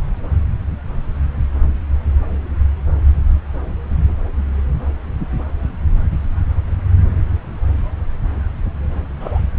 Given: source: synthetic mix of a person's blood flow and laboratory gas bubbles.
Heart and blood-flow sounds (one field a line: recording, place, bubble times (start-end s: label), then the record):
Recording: Doppler ultrasound of blood flow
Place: subclavian vein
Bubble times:
9.20-9.42 s: bubbles
From the record:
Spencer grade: 1 (occasional bubble signal discernible with the cardiac motion signal, with majority of cardiac periods free of bubbles)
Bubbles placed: anywhere in the cardiac cycle